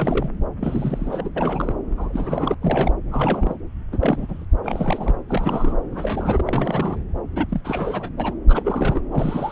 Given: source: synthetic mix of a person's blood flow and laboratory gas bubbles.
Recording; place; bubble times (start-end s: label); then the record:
Doppler ultrasound of blood flow; subclavian vein
0.00-0.31 s: bubbles
0.59-1.30 s: bubbles
1.36-1.73 s: bubbles
1.97-2.55 s: bubbles
2.62-2.94 s: bubbles
3.10-3.59 s: bubbles
3.92-4.26 s: bubbles
4.29-4.45 s: bubbles
4.63-5.15 s: bubbles
5.29-5.76 s: bubbles
5.92-6.97 s: bubbles
7.35-7.61 s: bubbles
7.64-8.10 s: bubbles
8.17-8.34 s: bubbles
8.49-9.01 s: bubbles
9.11-9.52 s: bubbles
From the record:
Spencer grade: 3 (all of the cardiac periods contain showers or single bubble signals, but not dominating or overriding the cardiac motion signals); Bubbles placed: anywhere in the cardiac cycle